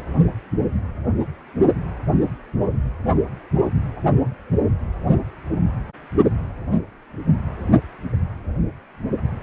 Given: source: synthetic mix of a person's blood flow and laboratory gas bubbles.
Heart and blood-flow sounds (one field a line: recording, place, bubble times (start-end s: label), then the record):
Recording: Doppler ultrasound of blood flow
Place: precordium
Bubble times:
2.62-2.77 s: bubbles
From the record:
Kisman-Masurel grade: 111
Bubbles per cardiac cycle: 1 to 2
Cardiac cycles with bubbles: 1 to 10%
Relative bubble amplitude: barely perceptible (0.100 to 0.250)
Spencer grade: 1 (occasional bubble signal discernible with the cardiac motion signal, with majority of cardiac periods free of bubbles)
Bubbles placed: anywhere in the cardiac cycle